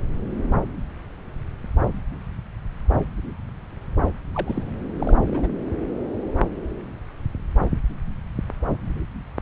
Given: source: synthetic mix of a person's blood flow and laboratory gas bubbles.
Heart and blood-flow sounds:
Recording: Doppler ultrasound of blood flow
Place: subclavian vein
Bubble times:
4.34-4.62 s: bubbles
4.99-5.48 s: bubbles
From the record:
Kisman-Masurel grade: 211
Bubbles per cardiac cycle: several, 3 to 8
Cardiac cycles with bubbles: 1 to 10%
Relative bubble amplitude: barely perceptible (0.100 to 0.250)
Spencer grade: 1 (occasional bubble signal discernible with the cardiac motion signal, with majority of cardiac periods free of bubbles)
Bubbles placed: anywhere in the cardiac cycle

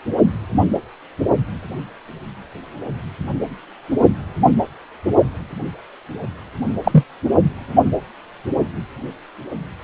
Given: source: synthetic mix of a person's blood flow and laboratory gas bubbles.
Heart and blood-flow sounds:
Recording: Doppler ultrasound of blood flow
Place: precordium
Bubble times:
6.84-7.04 s: bubbles
From the record:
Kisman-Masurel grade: 113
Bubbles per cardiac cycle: 1 to 2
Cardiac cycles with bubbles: 1 to 10%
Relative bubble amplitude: loud (0.450 to 0.775)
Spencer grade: 1 (occasional bubble signal discernible with the cardiac motion signal, with majority of cardiac periods free of bubbles)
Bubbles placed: only in the low amplitude regions of the cardiac cycle

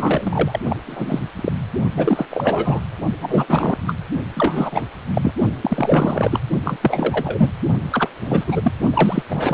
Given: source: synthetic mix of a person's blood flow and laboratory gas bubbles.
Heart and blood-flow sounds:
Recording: Doppler ultrasound of blood flow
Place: precordium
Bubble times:
0.00-0.59 s: bubbles
0.69-0.77 s: bubbles
0.86-1.24 s: bubbles
1.35-1.52 s: bubbles
1.95-2.25 s: bubbles
2.31-2.81 s: bubbles
3.21-3.46 s: bubbles
3.48-3.78 s: bubbles
3.87-3.95 s: bubbles
4.35-4.84 s: bubbles
5.13-5.33 s: bubbles
5.61-6.41 s: bubbles
6.64-6.76 s: bubbles
6.81-7.49 s: bubbles
7.92-8.08 s: bubbles
8.26-8.71 s: bubbles
8.94-9.23 s: bubbles
9.30-9.54 s: bubbles
From the record:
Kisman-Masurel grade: 333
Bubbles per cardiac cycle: rolling drumbeat, 9 or more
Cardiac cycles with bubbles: 50 to 99%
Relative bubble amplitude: loud (0.450 to 0.775)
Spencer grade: 3 (all of the cardiac periods contain showers or single bubble signals, but not dominating or overriding the cardiac motion signals)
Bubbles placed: only in the low amplitude regions of the cardiac cycle

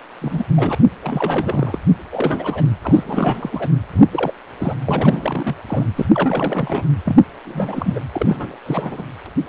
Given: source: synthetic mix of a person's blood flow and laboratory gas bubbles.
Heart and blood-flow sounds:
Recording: Doppler ultrasound of blood flow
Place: precordium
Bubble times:
0.21-0.45 s: bubbles
0.56-0.75 s: bubbles
1.04-1.79 s: bubbles
2.12-2.63 s: bubbles
2.83-3.69 s: bubbles
3.93-4.05 s: bubbles
4.12-4.32 s: bubbles
4.59-4.74 s: bubbles
4.86-5.56 s: bubbles
5.67-5.85 s: bubbles
5.95-6.06 s: bubbles
6.14-6.83 s: bubbles
7.05-7.22 s: bubbles
7.44-8.00 s: bubbles
8.12-8.57 s: bubbles
8.65-9.02 s: bubbles
9.25-9.29 s: bubbles
9.35-9.49 s: bubbles
From the record:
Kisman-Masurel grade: 342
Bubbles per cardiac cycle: rolling drumbeat, 9 or more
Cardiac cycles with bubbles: 100%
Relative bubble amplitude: moderate (0.250 to 0.450)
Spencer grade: 3 (all of the cardiac periods contain showers or single bubble signals, but not dominating or overriding the cardiac motion signals)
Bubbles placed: anywhere in the cardiac cycle

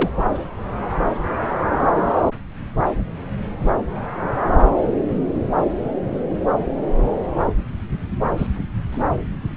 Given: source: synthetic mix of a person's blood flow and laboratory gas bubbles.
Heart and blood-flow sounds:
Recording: Doppler ultrasound of blood flow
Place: subclavian vein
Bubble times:
0.00-0.10 s: bubbles
8.37-8.46 s: bubbles
8.92-9.03 s: bubbles
From the record:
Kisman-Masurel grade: 122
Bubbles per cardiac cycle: 1 to 2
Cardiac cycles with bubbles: 10 to 50%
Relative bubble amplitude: moderate (0.250 to 0.450)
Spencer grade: 2 (many but less than half of the cardiac periods contain bubble signals, singularly or in groups)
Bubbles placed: anywhere in the cardiac cycle

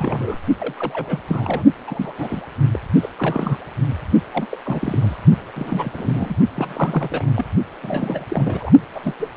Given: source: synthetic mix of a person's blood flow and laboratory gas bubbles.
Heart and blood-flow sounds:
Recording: Doppler ultrasound of blood flow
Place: precordium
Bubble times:
0.00-0.38 s: bubbles
0.59-1.19 s: bubbles
1.28-1.63 s: bubbles
1.87-2.13 s: bubbles
2.18-2.42 s: bubbles
2.73-2.79 s: bubbles
3.02-3.09 s: bubbles
3.19-3.57 s: bubbles
4.33-4.46 s: bubbles
4.51-4.58 s: bubbles
4.64-5.17 s: bubbles
5.55-6.36 s: bubbles
6.54-7.32 s: bubbles
7.35-7.50 s: bubbles
7.82-8.26 s: bubbles
8.29-8.71 s: bubbles
8.95-9.15 s: bubbles
9.20-9.30 s: bubbles
From the record:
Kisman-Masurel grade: 342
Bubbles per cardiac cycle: rolling drumbeat, 9 or more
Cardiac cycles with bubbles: 100%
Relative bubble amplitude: moderate (0.250 to 0.450)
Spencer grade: 3 (all of the cardiac periods contain showers or single bubble signals, but not dominating or overriding the cardiac motion signals)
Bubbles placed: only in the low amplitude regions of the cardiac cycle

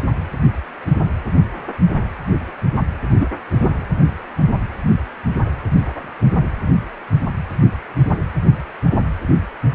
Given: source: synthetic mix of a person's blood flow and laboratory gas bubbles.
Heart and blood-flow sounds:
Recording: Doppler ultrasound of blood flow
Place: precordium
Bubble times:
3.19-3.28 s: bubbles
3.62-3.70 s: bubbles
From the record:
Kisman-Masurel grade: 112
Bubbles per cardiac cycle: 1 to 2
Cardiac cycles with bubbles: 1 to 10%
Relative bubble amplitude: moderate (0.250 to 0.450)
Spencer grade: 1 (occasional bubble signal discernible with the cardiac motion signal, with majority of cardiac periods free of bubbles)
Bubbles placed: anywhere in the cardiac cycle

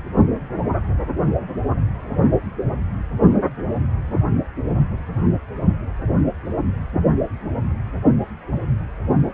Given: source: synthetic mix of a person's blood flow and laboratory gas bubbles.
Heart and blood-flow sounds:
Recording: Doppler ultrasound of blood flow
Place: precordium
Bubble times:
no bubbles
From the record:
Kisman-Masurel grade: 000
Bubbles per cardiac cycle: 0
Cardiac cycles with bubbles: 0%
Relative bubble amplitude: no bubbles discernible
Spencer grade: 0 (complete lack of bubble signals)

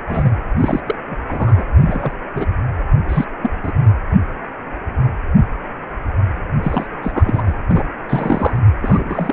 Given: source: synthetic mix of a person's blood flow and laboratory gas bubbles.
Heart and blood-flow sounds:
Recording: Doppler ultrasound of blood flow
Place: precordium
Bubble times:
0.07-0.31 s: bubbles
0.57-0.80 s: bubbles
0.86-0.95 s: bubbles
1.07-1.15 s: bubbles
1.27-1.66 s: bubbles
1.81-2.12 s: bubbles
2.34-2.46 s: bubbles
3.08-3.25 s: bubbles
3.42-3.50 s: bubbles
3.63-3.73 s: bubbles
6.62-6.87 s: bubbles
7.02-7.54 s: bubbles
7.69-7.83 s: bubbles
8.09-8.59 s: bubbles
8.81-9.33 s: bubbles
From the record:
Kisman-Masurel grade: 232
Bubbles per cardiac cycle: several, 3 to 8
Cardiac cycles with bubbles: 50 to 99%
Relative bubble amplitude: moderate (0.250 to 0.450)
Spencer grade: 3 (all of the cardiac periods contain showers or single bubble signals, but not dominating or overriding the cardiac motion signals)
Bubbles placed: anywhere in the cardiac cycle

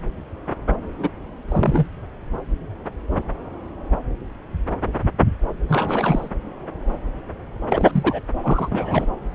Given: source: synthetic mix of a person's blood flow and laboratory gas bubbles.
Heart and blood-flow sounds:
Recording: Doppler ultrasound of blood flow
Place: subclavian vein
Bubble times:
0.99-1.08 s: bubbles
1.48-1.86 s: bubbles
5.67-6.29 s: bubbles
7.69-8.20 s: bubbles
8.43-9.07 s: bubbles
From the record:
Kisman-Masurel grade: 222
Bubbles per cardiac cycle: several, 3 to 8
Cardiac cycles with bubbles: 10 to 50%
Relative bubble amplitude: moderate (0.250 to 0.450)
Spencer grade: 2 (many but less than half of the cardiac periods contain bubble signals, singularly or in groups)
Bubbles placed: anywhere in the cardiac cycle

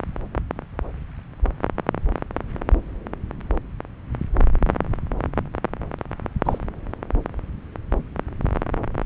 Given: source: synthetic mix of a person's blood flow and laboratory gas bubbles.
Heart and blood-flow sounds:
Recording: Doppler ultrasound of blood flow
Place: subclavian vein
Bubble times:
6.45-6.58 s: bubbles
From the record:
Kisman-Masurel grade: 112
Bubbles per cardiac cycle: 1 to 2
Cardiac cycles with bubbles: 1 to 10%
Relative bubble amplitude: moderate (0.250 to 0.450)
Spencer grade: 1 (occasional bubble signal discernible with the cardiac motion signal, with majority of cardiac periods free of bubbles)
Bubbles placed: anywhere in the cardiac cycle

